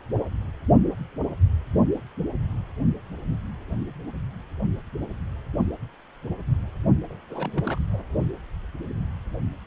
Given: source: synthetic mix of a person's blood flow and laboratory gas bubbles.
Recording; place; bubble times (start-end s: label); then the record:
Doppler ultrasound of blood flow; precordium
7.10-7.25 s: bubbles
7.28-7.78 s: bubbles
7.94-8.02 s: bubbles
From the record:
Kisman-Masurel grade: 211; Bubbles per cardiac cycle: several, 3 to 8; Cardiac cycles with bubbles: 1 to 10%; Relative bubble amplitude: barely perceptible (0.100 to 0.250); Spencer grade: 1 (occasional bubble signal discernible with the cardiac motion signal, with majority of cardiac periods free of bubbles); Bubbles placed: only in the low amplitude regions of the cardiac cycle